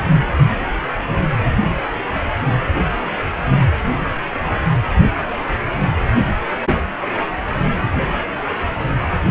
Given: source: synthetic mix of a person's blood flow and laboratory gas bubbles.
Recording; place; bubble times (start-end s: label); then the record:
Doppler ultrasound of blood flow; precordium
no bubbles
From the record:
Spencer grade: 0 (complete lack of bubble signals)